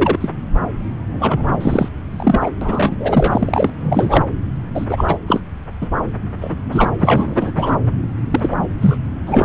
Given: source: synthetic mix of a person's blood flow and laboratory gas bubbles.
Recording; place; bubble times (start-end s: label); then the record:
Doppler ultrasound of blood flow; subclavian vein
0.00-0.18 s: bubbles
0.21-0.29 s: bubbles
1.11-1.89 s: bubbles
2.10-2.50 s: bubbles
2.61-3.70 s: bubbles
3.81-4.24 s: bubbles
4.74-4.86 s: bubbles
4.88-5.18 s: bubbles
5.27-5.41 s: bubbles
5.81-5.88 s: bubbles
6.40-6.55 s: bubbles
6.71-6.92 s: bubbles
6.99-7.53 s: bubbles
7.56-7.77 s: bubbles
8.30-8.55 s: bubbles
8.80-8.96 s: bubbles
9.25-9.45 s: bubbles
From the record:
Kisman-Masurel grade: 233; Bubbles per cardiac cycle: several, 3 to 8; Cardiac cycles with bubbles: 50 to 99%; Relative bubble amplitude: loud (0.450 to 0.775); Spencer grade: 3 (all of the cardiac periods contain showers or single bubble signals, but not dominating or overriding the cardiac motion signals); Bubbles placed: anywhere in the cardiac cycle